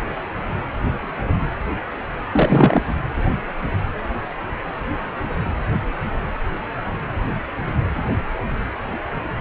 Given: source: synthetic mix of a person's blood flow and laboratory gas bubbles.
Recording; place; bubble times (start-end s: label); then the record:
Doppler ultrasound of blood flow; precordium
2.32-2.82 s: bubbles
2.88-2.93 s: bubbles
From the record:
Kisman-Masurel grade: 213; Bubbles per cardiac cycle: several, 3 to 8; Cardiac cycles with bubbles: 1 to 10%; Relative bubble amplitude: loud (0.450 to 0.775); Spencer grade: 1 (occasional bubble signal discernible with the cardiac motion signal, with majority of cardiac periods free of bubbles); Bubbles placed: anywhere in the cardiac cycle